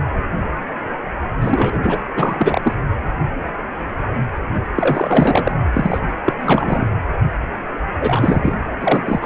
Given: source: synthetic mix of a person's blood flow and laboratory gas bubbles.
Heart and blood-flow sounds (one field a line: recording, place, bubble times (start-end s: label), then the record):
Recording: Doppler ultrasound of blood flow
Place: precordium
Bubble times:
1.41-1.79 s: bubbles
1.83-2.00 s: bubbles
2.17-2.73 s: bubbles
4.75-5.52 s: bubbles
5.73-6.00 s: bubbles
6.26-6.33 s: bubbles
6.40-6.87 s: bubbles
7.99-8.53 s: bubbles
8.79-9.26 s: bubbles
From the record:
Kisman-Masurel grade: 333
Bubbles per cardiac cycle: rolling drumbeat, 9 or more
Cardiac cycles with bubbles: 50 to 99%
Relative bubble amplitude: loud (0.450 to 0.775)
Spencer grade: 3 (all of the cardiac periods contain showers or single bubble signals, but not dominating or overriding the cardiac motion signals)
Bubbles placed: anywhere in the cardiac cycle